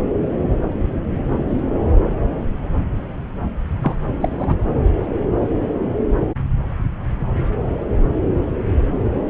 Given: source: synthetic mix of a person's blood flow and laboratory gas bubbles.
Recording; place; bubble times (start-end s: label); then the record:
Doppler ultrasound of blood flow; subclavian vein
3.81-3.95 s: bubbles
4.21-4.56 s: bubbles
From the record:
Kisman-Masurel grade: 213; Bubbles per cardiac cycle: several, 3 to 8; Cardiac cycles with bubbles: 1 to 10%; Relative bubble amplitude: loud (0.450 to 0.775); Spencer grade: 1 (occasional bubble signal discernible with the cardiac motion signal, with majority of cardiac periods free of bubbles); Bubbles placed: anywhere in the cardiac cycle